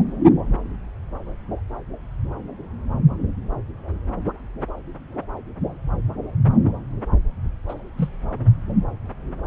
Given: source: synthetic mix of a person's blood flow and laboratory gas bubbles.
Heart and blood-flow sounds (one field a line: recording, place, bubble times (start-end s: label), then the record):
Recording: Doppler ultrasound of blood flow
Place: subclavian vein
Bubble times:
7.68-7.75 s: bubbles
7.98-8.09 s: bubbles
From the record:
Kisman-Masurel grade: 212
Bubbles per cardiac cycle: several, 3 to 8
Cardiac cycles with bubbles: 1 to 10%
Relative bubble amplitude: moderate (0.250 to 0.450)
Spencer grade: 1 (occasional bubble signal discernible with the cardiac motion signal, with majority of cardiac periods free of bubbles)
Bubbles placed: anywhere in the cardiac cycle